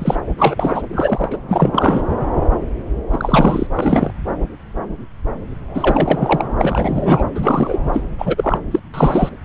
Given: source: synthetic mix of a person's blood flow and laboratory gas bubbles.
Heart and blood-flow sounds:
Doppler ultrasound of blood flow; subclavian vein
0.00-0.16 s: bubbles
0.38-0.82 s: bubbles
0.93-1.38 s: bubbles
1.49-2.01 s: bubbles
3.12-3.67 s: bubbles
3.74-4.11 s: bubbles
5.75-6.46 s: bubbles
6.58-7.25 s: bubbles
7.35-7.77 s: bubbles
7.93-8.04 s: bubbles
8.18-8.59 s: bubbles
8.71-8.79 s: bubbles
8.94-9.29 s: bubbles
From the record:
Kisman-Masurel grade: 233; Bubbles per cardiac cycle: several, 3 to 8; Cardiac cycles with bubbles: 50 to 99%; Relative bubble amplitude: loud (0.450 to 0.775); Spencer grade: 3 (all of the cardiac periods contain showers or single bubble signals, but not dominating or overriding the cardiac motion signals); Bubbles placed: anywhere in the cardiac cycle

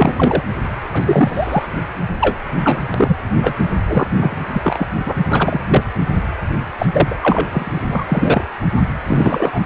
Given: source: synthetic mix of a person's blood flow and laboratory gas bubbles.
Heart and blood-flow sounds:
Doppler ultrasound of blood flow; precordium
0.00-0.43 s: bubbles
0.80-1.65 s: bubbles
2.20-2.38 s: bubbles
2.47-2.82 s: bubbles
2.94-3.16 s: bubbles
3.42-3.54 s: bubbles
3.87-4.07 s: bubbles
4.16-4.37 s: bubbles
4.47-4.87 s: bubbles
5.05-5.14 s: bubbles
5.29-5.60 s: bubbles
5.68-5.83 s: bubbles
6.79-6.87 s: bubbles
6.92-7.15 s: bubbles
7.22-7.82 s: bubbles
7.89-8.05 s: bubbles
8.08-8.44 s: bubbles
9.06-9.60 s: bubbles
From the record:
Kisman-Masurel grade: 243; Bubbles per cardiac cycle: several, 3 to 8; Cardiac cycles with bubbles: 100%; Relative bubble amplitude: loud (0.450 to 0.775); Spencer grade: 3 (all of the cardiac periods contain showers or single bubble signals, but not dominating or overriding the cardiac motion signals); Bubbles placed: anywhere in the cardiac cycle

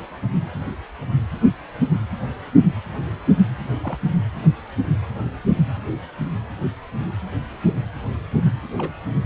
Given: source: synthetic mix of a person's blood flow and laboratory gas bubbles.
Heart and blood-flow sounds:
Doppler ultrasound of blood flow; precordium
3.83-3.98 s: bubbles
5.47-5.54 s: bubbles
8.77-8.92 s: bubbles
From the record:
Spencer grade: 2 (many but less than half of the cardiac periods contain bubble signals, singularly or in groups); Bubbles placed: anywhere in the cardiac cycle

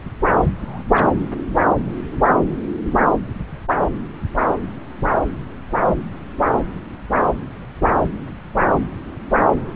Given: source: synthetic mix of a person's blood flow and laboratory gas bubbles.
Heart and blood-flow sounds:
Doppler ultrasound of blood flow; subclavian vein
0.59-0.83 s: bubbles
0.95-1.08 s: bubbles
From the record:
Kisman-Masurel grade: 111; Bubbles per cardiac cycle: 1 to 2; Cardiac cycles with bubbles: 1 to 10%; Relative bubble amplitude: barely perceptible (0.100 to 0.250); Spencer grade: 1 (occasional bubble signal discernible with the cardiac motion signal, with majority of cardiac periods free of bubbles); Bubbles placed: anywhere in the cardiac cycle

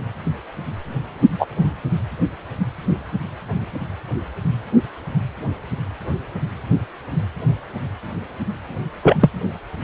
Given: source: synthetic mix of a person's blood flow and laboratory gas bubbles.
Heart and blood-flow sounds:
Doppler ultrasound of blood flow; precordium
1.39-1.47 s: bubbles
9.03-9.16 s: bubbles
9.21-9.30 s: bubbles
From the record:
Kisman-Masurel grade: 123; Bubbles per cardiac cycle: 1 to 2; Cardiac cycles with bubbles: 10 to 50%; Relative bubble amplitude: loud (0.450 to 0.775); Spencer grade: 2 (many but less than half of the cardiac periods contain bubble signals, singularly or in groups); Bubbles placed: anywhere in the cardiac cycle

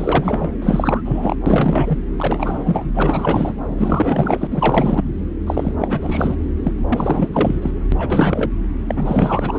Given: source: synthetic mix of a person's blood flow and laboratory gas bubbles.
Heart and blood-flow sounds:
Doppler ultrasound of blood flow; subclavian vein
0.00-0.51 s: bubbles
0.61-1.02 s: bubbles
1.05-1.36 s: bubbles
1.46-1.99 s: bubbles
2.17-2.90 s: bubbles
2.94-3.56 s: bubbles
3.69-4.48 s: bubbles
4.50-5.04 s: bubbles
5.46-5.75 s: bubbles
5.79-6.36 s: bubbles
6.63-6.72 s: bubbles
6.89-7.28 s: bubbles
7.33-7.71 s: bubbles
7.92-8.49 s: bubbles
8.88-9.59 s: bubbles
From the record:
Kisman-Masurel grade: 444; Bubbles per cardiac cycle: continuous sound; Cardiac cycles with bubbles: 100%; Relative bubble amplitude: maximal (0.775 to 0.999); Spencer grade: 4 (maximum detectable bubble signal sounding continuously throughout systole and diastole of every cardiac period, and overriding the amplitude of the normal cardiac signals); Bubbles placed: anywhere in the cardiac cycle

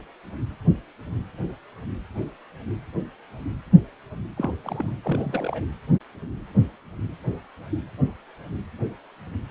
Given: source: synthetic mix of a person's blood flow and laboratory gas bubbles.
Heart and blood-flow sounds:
Doppler ultrasound of blood flow; precordium
4.36-4.53 s: bubbles
4.63-4.96 s: bubbles
5.04-5.65 s: bubbles
From the record:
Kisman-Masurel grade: 221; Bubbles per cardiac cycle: several, 3 to 8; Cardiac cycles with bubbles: 10 to 50%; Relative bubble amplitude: barely perceptible (0.100 to 0.250); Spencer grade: 2 (many but less than half of the cardiac periods contain bubble signals, singularly or in groups); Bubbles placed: anywhere in the cardiac cycle

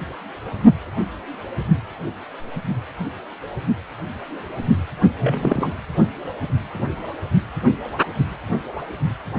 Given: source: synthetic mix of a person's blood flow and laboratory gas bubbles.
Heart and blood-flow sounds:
Doppler ultrasound of blood flow; precordium
5.20-5.72 s: bubbles
From the record:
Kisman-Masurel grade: 212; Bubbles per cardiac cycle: several, 3 to 8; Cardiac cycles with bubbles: 1 to 10%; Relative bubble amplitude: moderate (0.250 to 0.450); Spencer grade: 1 (occasional bubble signal discernible with the cardiac motion signal, with majority of cardiac periods free of bubbles); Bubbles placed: only in the low amplitude regions of the cardiac cycle

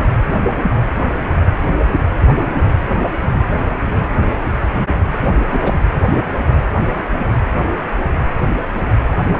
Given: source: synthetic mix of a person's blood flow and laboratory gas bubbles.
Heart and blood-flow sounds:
Doppler ultrasound of blood flow; precordium
5.20-5.29 s: bubbles
5.49-5.79 s: bubbles
From the record:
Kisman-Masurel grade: 212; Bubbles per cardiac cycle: several, 3 to 8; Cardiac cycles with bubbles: 1 to 10%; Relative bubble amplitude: moderate (0.250 to 0.450); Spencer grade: 1 (occasional bubble signal discernible with the cardiac motion signal, with majority of cardiac periods free of bubbles); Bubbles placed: anywhere in the cardiac cycle

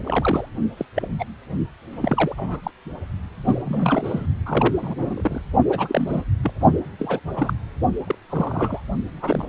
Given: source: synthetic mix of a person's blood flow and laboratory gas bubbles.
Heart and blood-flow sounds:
Doppler ultrasound of blood flow; precordium
0.05-0.48 s: bubbles
0.77-0.85 s: bubbles
0.96-1.08 s: bubbles
1.19-1.25 s: bubbles
1.92-2.60 s: bubbles
2.63-2.71 s: bubbles
3.44-3.62 s: bubbles
3.65-4.27 s: bubbles
4.46-5.42 s: bubbles
5.67-6.22 s: bubbles
6.43-6.53 s: bubbles
6.99-7.20 s: bubbles
7.36-7.54 s: bubbles
8.07-8.15 s: bubbles
8.29-8.80 s: bubbles
9.11-9.45 s: bubbles
From the record:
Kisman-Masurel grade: 242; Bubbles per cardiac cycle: several, 3 to 8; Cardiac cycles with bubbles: 100%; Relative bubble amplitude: moderate (0.250 to 0.450); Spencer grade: 3 (all of the cardiac periods contain showers or single bubble signals, but not dominating or overriding the cardiac motion signals); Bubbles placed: only in the low amplitude regions of the cardiac cycle

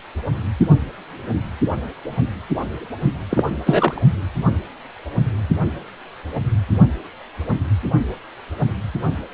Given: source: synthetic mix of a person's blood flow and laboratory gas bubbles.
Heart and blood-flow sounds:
Doppler ultrasound of blood flow; precordium
3.29-3.44 s: bubbles
3.66-4.02 s: bubbles
From the record:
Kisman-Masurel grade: 213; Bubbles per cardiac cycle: several, 3 to 8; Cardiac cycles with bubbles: 1 to 10%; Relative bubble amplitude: loud (0.450 to 0.775); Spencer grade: 1 (occasional bubble signal discernible with the cardiac motion signal, with majority of cardiac periods free of bubbles); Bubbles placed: anywhere in the cardiac cycle

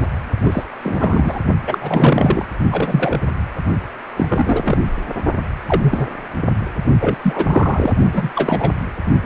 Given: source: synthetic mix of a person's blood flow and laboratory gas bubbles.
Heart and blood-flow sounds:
Doppler ultrasound of blood flow; precordium
0.00-0.07 s: bubbles
0.43-0.64 s: bubbles
0.82-1.39 s: bubbles
1.67-2.45 s: bubbles
2.71-3.18 s: bubbles
4.16-4.80 s: bubbles
5.67-6.07 s: bubbles
7.00-7.17 s: bubbles
7.22-7.92 s: bubbles
8.13-8.30 s: bubbles
8.35-8.72 s: bubbles
From the record:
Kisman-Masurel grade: 243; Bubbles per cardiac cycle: several, 3 to 8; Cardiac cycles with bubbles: 100%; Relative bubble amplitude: loud (0.450 to 0.775); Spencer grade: 3 (all of the cardiac periods contain showers or single bubble signals, but not dominating or overriding the cardiac motion signals); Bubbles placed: only in the low amplitude regions of the cardiac cycle

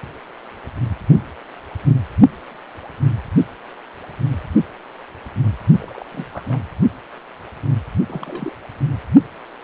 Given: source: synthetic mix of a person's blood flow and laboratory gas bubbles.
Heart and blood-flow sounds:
Doppler ultrasound of blood flow; precordium
5.79-6.05 s: bubbles
6.12-6.27 s: bubbles
6.33-6.45 s: bubbles
6.48-6.60 s: bubbles
8.09-8.54 s: bubbles
From the record:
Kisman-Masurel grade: 221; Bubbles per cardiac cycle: several, 3 to 8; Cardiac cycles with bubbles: 10 to 50%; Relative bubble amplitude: barely perceptible (0.100 to 0.250); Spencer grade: 2 (many but less than half of the cardiac periods contain bubble signals, singularly or in groups); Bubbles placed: only in the low amplitude regions of the cardiac cycle

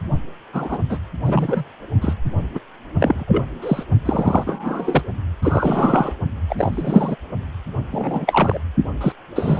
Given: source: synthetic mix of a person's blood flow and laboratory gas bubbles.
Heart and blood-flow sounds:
Doppler ultrasound of blood flow; precordium
0.53-0.79 s: bubbles
0.90-0.98 s: bubbles
1.24-1.64 s: bubbles
2.01-2.14 s: bubbles
2.54-2.59 s: bubbles
3.00-3.24 s: bubbles
3.27-3.44 s: bubbles
3.62-3.83 s: bubbles
4.05-5.02 s: bubbles
5.42-6.14 s: bubbles
6.49-7.16 s: bubbles
7.92-8.58 s: bubbles
9.00-9.12 s: bubbles
9.35-9.60 s: bubbles
From the record:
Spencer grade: 3 (all of the cardiac periods contain showers or single bubble signals, but not dominating or overriding the cardiac motion signals); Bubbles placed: only in the low amplitude regions of the cardiac cycle

